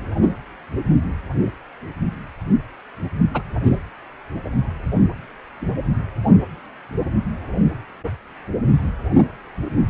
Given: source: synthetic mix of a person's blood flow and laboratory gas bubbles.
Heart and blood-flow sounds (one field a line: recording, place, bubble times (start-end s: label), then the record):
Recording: Doppler ultrasound of blood flow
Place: precordium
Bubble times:
3.34-3.43 s: bubbles
3.63-3.78 s: bubbles
From the record:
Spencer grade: 2 (many but less than half of the cardiac periods contain bubble signals, singularly or in groups)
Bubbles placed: anywhere in the cardiac cycle